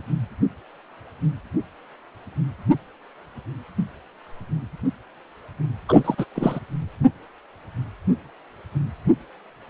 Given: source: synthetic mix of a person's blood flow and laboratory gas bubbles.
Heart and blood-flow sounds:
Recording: Doppler ultrasound of blood flow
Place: precordium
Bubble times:
5.88-6.25 s: bubbles
6.34-6.59 s: bubbles
From the record:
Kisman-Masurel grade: 213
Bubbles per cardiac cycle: several, 3 to 8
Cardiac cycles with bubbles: 1 to 10%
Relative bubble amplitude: loud (0.450 to 0.775)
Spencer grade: 1 (occasional bubble signal discernible with the cardiac motion signal, with majority of cardiac periods free of bubbles)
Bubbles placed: anywhere in the cardiac cycle

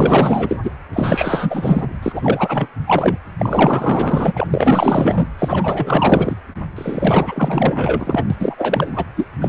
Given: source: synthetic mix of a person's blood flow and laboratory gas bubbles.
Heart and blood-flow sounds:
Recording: Doppler ultrasound of blood flow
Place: precordium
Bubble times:
0.00-0.57 s: bubbles
0.63-0.71 s: bubbles
0.93-1.88 s: bubbles
2.02-2.68 s: bubbles
2.86-3.17 s: bubbles
3.38-4.47 s: bubbles
4.50-5.27 s: bubbles
5.38-6.35 s: bubbles
6.75-8.25 s: bubbles
8.30-8.36 s: bubbles
8.39-9.07 s: bubbles
9.16-9.28 s: bubbles
9.32-9.49 s: bubbles
From the record:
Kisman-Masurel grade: 444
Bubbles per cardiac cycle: continuous sound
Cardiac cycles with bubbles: 100%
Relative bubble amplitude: maximal (0.775 to 0.999)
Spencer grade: 4 (maximum detectable bubble signal sounding continuously throughout systole and diastole of every cardiac period, and overriding the amplitude of the normal cardiac signals)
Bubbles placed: anywhere in the cardiac cycle

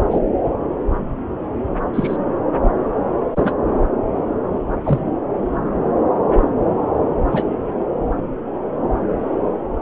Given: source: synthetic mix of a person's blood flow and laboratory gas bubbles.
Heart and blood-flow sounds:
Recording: Doppler ultrasound of blood flow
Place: subclavian vein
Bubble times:
0.10-0.19 s: bubbles
1.94-2.17 s: bubbles
3.35-3.54 s: bubbles
4.84-4.98 s: bubbles
7.31-7.45 s: bubbles
From the record:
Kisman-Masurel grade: 123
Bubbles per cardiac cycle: 1 to 2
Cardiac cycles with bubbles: 10 to 50%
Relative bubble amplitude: loud (0.450 to 0.775)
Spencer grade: 2 (many but less than half of the cardiac periods contain bubble signals, singularly or in groups)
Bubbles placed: anywhere in the cardiac cycle

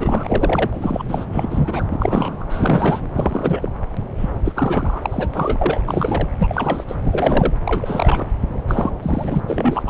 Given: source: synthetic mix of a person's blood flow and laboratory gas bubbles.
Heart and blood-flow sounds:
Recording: Doppler ultrasound of blood flow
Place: subclavian vein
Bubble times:
0.00-1.04 s: bubbles
1.08-1.25 s: bubbles
1.32-1.84 s: bubbles
1.91-2.46 s: bubbles
2.49-3.00 s: bubbles
3.13-3.69 s: bubbles
4.17-4.30 s: bubbles
4.45-5.81 s: bubbles
5.88-6.28 s: bubbles
6.38-6.84 s: bubbles
6.88-6.96 s: bubbles
7.03-7.54 s: bubbles
7.66-8.25 s: bubbles
8.68-8.91 s: bubbles
9.02-9.40 s: bubbles
9.47-9.82 s: bubbles
9.87-9.89 s: bubbles
From the record:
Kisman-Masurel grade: 342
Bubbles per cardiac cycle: rolling drumbeat, 9 or more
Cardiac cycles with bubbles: 100%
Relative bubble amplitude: moderate (0.250 to 0.450)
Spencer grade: 3 (all of the cardiac periods contain showers or single bubble signals, but not dominating or overriding the cardiac motion signals)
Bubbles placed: anywhere in the cardiac cycle

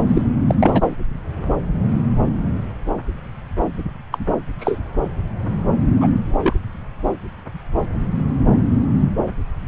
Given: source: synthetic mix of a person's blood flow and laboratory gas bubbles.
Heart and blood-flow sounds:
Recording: Doppler ultrasound of blood flow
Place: subclavian vein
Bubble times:
0.07-0.22 s: bubbles
0.47-0.55 s: bubbles
0.59-0.95 s: bubbles
4.12-4.18 s: bubbles
4.59-4.79 s: bubbles
6.00-6.08 s: bubbles
6.25-6.55 s: bubbles
From the record:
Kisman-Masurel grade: 223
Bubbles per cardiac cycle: several, 3 to 8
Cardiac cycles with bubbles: 10 to 50%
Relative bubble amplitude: loud (0.450 to 0.775)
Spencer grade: 2 (many but less than half of the cardiac periods contain bubble signals, singularly or in groups)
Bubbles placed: anywhere in the cardiac cycle

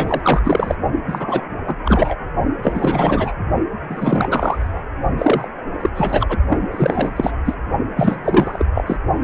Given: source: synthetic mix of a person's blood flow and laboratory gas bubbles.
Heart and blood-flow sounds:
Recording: Doppler ultrasound of blood flow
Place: precordium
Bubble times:
0.00-0.21 s: bubbles
0.23-0.75 s: bubbles
1.08-1.44 s: bubbles
1.67-1.76 s: bubbles
1.85-2.15 s: bubbles
2.62-3.33 s: bubbles
3.89-4.83 s: bubbles
5.18-5.49 s: bubbles
5.80-5.90 s: bubbles
5.95-6.38 s: bubbles
6.50-6.58 s: bubbles
6.71-7.32 s: bubbles
7.45-7.54 s: bubbles
7.96-8.65 s: bubbles
8.74-8.96 s: bubbles
From the record:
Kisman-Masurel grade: 343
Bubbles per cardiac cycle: rolling drumbeat, 9 or more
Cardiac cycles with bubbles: 100%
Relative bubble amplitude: loud (0.450 to 0.775)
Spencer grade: 3 (all of the cardiac periods contain showers or single bubble signals, but not dominating or overriding the cardiac motion signals)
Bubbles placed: only in the low amplitude regions of the cardiac cycle

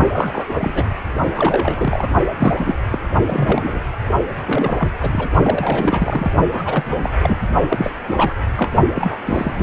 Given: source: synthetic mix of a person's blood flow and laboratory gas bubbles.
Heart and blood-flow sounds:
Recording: Doppler ultrasound of blood flow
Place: precordium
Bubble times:
0.06-1.02 s: bubbles
1.34-2.09 s: bubbles
2.36-2.75 s: bubbles
2.92-2.99 s: bubbles
3.26-3.79 s: bubbles
4.46-4.89 s: bubbles
5.01-5.29 s: bubbles
5.44-6.32 s: bubbles
6.52-7.10 s: bubbles
7.21-7.38 s: bubbles
7.69-7.92 s: bubbles
8.06-8.35 s: bubbles
8.56-8.72 s: bubbles
8.95-9.18 s: bubbles
9.26-9.63 s: bubbles
From the record:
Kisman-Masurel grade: 342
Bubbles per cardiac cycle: rolling drumbeat, 9 or more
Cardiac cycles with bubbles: 100%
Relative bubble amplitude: moderate (0.250 to 0.450)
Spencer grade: 3 (all of the cardiac periods contain showers or single bubble signals, but not dominating or overriding the cardiac motion signals)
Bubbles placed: only in the low amplitude regions of the cardiac cycle

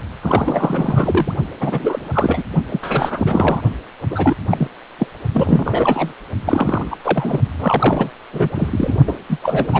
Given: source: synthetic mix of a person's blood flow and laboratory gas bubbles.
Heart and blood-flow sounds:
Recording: Doppler ultrasound of blood flow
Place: precordium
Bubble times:
0.21-1.32 s: bubbles
1.60-2.44 s: bubbles
2.70-2.79 s: bubbles
2.83-3.60 s: bubbles
4.10-4.34 s: bubbles
4.50-4.67 s: bubbles
4.99-5.07 s: bubbles
5.34-6.13 s: bubbles
6.46-6.96 s: bubbles
7.04-7.40 s: bubbles
7.59-8.10 s: bubbles
8.32-8.48 s: bubbles
8.54-8.98 s: bubbles
9.07-9.14 s: bubbles
9.29-9.38 s: bubbles
9.43-9.80 s: bubbles
From the record:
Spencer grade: 3 (all of the cardiac periods contain showers or single bubble signals, but not dominating or overriding the cardiac motion signals)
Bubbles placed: only in the low amplitude regions of the cardiac cycle

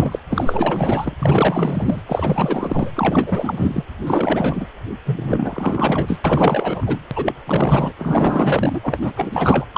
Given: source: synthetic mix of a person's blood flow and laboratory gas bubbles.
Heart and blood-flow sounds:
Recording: Doppler ultrasound of blood flow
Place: precordium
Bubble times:
0.00-0.20 s: bubbles
0.30-1.17 s: bubbles
1.21-2.01 s: bubbles
2.06-2.90 s: bubbles
2.96-3.83 s: bubbles
4.06-4.66 s: bubbles
5.05-6.20 s: bubbles
6.24-7.06 s: bubbles
7.11-7.34 s: bubbles
7.46-7.92 s: bubbles
7.99-8.80 s: bubbles
8.83-8.99 s: bubbles
9.01-9.14 s: bubbles
9.16-9.65 s: bubbles
9.73-9.78 s: bubbles
From the record:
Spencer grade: 4 (maximum detectable bubble signal sounding continuously throughout systole and diastole of every cardiac period, and overriding the amplitude of the normal cardiac signals)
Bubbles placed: anywhere in the cardiac cycle

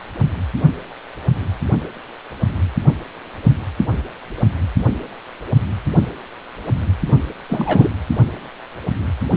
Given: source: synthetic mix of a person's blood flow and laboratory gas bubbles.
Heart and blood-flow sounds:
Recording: Doppler ultrasound of blood flow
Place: precordium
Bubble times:
7.49-7.89 s: bubbles
From the record:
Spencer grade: 1 (occasional bubble signal discernible with the cardiac motion signal, with majority of cardiac periods free of bubbles)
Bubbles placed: anywhere in the cardiac cycle

